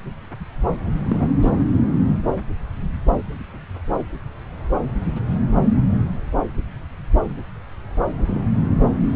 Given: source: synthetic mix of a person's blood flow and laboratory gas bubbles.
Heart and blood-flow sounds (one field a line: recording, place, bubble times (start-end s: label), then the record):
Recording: Doppler ultrasound of blood flow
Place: subclavian vein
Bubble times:
0.98-1.30 s: bubbles
1.42-1.50 s: bubbles
8.18-8.24 s: bubbles
8.28-8.42 s: bubbles
From the record:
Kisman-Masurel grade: 211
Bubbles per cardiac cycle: several, 3 to 8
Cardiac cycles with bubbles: 1 to 10%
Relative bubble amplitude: barely perceptible (0.100 to 0.250)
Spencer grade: 1 (occasional bubble signal discernible with the cardiac motion signal, with majority of cardiac periods free of bubbles)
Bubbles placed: anywhere in the cardiac cycle